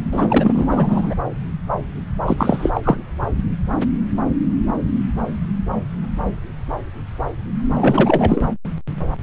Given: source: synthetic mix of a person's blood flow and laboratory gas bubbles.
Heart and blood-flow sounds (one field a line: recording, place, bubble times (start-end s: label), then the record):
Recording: Doppler ultrasound of blood flow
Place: subclavian vein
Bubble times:
0.11-1.15 s: bubbles
2.26-2.71 s: bubbles
2.74-2.81 s: bubbles
2.83-2.97 s: bubbles
7.69-8.47 s: bubbles
From the record:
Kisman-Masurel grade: 333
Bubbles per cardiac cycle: rolling drumbeat, 9 or more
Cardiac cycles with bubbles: 50 to 99%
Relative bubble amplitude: loud (0.450 to 0.775)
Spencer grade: 3 (all of the cardiac periods contain showers or single bubble signals, but not dominating or overriding the cardiac motion signals)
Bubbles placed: anywhere in the cardiac cycle